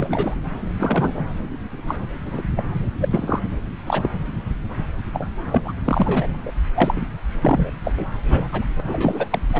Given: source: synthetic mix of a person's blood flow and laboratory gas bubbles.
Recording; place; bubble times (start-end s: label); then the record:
Doppler ultrasound of blood flow; subclavian vein
0.00-0.36 s: bubbles
0.77-1.26 s: bubbles
1.88-1.96 s: bubbles
2.25-2.42 s: bubbles
2.56-2.63 s: bubbles
3.00-3.40 s: bubbles
3.86-4.10 s: bubbles
5.13-5.29 s: bubbles
5.51-5.73 s: bubbles
5.85-6.41 s: bubbles
6.46-6.53 s: bubbles
6.74-7.06 s: bubbles
7.41-7.71 s: bubbles
7.84-7.94 s: bubbles
7.96-8.05 s: bubbles
8.29-8.49 s: bubbles
8.52-8.66 s: bubbles
8.77-8.80 s: bubbles
8.86-9.28 s: bubbles
9.30-9.39 s: bubbles
9.53-9.60 s: bubbles
From the record:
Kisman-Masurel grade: 243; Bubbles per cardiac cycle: several, 3 to 8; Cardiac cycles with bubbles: 100%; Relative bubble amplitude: loud (0.450 to 0.775); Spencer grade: 3 (all of the cardiac periods contain showers or single bubble signals, but not dominating or overriding the cardiac motion signals); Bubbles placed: anywhere in the cardiac cycle